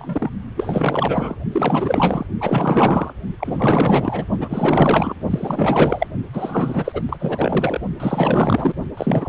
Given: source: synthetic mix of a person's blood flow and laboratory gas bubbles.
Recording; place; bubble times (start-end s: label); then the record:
Doppler ultrasound of blood flow; precordium
0.00-0.29 s: bubbles
0.56-1.35 s: bubbles
1.52-2.26 s: bubbles
2.41-3.13 s: bubbles
3.40-4.25 s: bubbles
4.38-5.15 s: bubbles
5.30-6.07 s: bubbles
6.33-7.02 s: bubbles
7.09-7.17 s: bubbles
7.20-7.81 s: bubbles
8.00-8.73 s: bubbles
8.97-9.29 s: bubbles
From the record:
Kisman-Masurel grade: 444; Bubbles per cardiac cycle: continuous sound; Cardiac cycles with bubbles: 100%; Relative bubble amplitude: maximal (0.775 to 0.999); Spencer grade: 4 (maximum detectable bubble signal sounding continuously throughout systole and diastole of every cardiac period, and overriding the amplitude of the normal cardiac signals); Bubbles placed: only in the low amplitude regions of the cardiac cycle